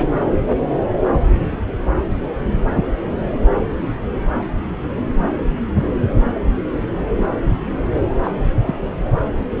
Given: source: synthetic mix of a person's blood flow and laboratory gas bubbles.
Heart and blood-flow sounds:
Doppler ultrasound of blood flow; subclavian vein
7.14-7.29 s: bubbles
8.23-8.31 s: bubbles
8.64-8.88 s: bubbles
From the record:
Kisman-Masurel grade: 122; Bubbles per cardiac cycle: 1 to 2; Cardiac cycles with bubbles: 10 to 50%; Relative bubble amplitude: moderate (0.250 to 0.450); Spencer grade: 2 (many but less than half of the cardiac periods contain bubble signals, singularly or in groups); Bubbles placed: anywhere in the cardiac cycle

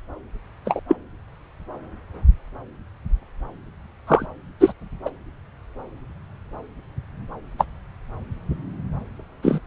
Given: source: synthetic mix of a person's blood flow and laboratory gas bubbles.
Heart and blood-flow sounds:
Doppler ultrasound of blood flow; subclavian vein
0.65-0.80 s: bubbles
0.88-0.96 s: bubbles
4.07-4.25 s: bubbles
4.60-4.72 s: bubbles
5.05-5.10 s: bubbles
7.58-7.65 s: bubbles
9.42-9.60 s: bubbles
From the record:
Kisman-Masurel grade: 123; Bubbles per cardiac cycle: 1 to 2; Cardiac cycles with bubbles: 10 to 50%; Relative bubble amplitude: loud (0.450 to 0.775); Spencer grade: 2 (many but less than half of the cardiac periods contain bubble signals, singularly or in groups); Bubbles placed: anywhere in the cardiac cycle

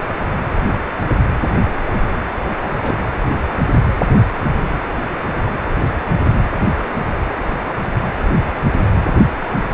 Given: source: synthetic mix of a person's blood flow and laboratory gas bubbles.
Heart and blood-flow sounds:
Doppler ultrasound of blood flow; precordium
1.93-2.03 s: bubbles
2.62-2.70 s: bubbles
2.80-2.97 s: bubbles
9.50-9.54 s: bubbles
From the record:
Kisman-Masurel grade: 221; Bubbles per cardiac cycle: several, 3 to 8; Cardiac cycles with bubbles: 10 to 50%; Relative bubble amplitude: barely perceptible (0.100 to 0.250); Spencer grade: 2 (many but less than half of the cardiac periods contain bubble signals, singularly or in groups); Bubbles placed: anywhere in the cardiac cycle

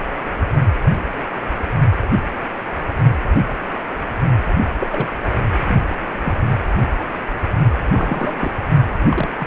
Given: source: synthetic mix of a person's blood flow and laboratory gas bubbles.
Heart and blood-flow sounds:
Doppler ultrasound of blood flow; precordium
4.79-5.16 s: bubbles
5.66-5.75 s: bubbles
6.22-6.33 s: bubbles
7.87-8.36 s: bubbles
8.39-8.51 s: bubbles
9.05-9.29 s: bubbles
9.38-9.46 s: bubbles
From the record:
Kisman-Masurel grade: 222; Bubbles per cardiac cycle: several, 3 to 8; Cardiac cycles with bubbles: 10 to 50%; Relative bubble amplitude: moderate (0.250 to 0.450); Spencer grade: 2 (many but less than half of the cardiac periods contain bubble signals, singularly or in groups); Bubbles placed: only in the low amplitude regions of the cardiac cycle

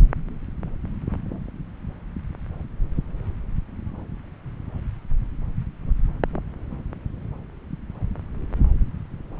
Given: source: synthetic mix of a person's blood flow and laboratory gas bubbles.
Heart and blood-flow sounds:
Doppler ultrasound of blood flow; subclavian vein
no bubbles
From the record:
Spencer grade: 0 (complete lack of bubble signals)

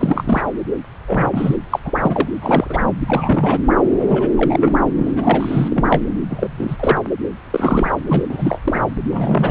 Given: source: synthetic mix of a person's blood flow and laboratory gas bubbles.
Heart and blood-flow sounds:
Doppler ultrasound of blood flow; subclavian vein
0.00-0.42 s: bubbles
1.07-1.56 s: bubbles
1.70-1.79 s: bubbles
1.85-2.29 s: bubbles
2.41-2.83 s: bubbles
3.08-3.60 s: bubbles
4.00-4.31 s: bubbles
4.35-4.79 s: bubbles
4.98-5.11 s: bubbles
5.15-6.01 s: bubbles
6.29-6.49 s: bubbles
6.57-6.76 s: bubbles
6.79-6.97 s: bubbles
7.50-7.90 s: bubbles
8.08-8.23 s: bubbles
8.29-8.59 s: bubbles
8.63-8.82 s: bubbles
9.12-9.51 s: bubbles
From the record:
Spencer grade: 3 (all of the cardiac periods contain showers or single bubble signals, but not dominating or overriding the cardiac motion signals); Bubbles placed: anywhere in the cardiac cycle

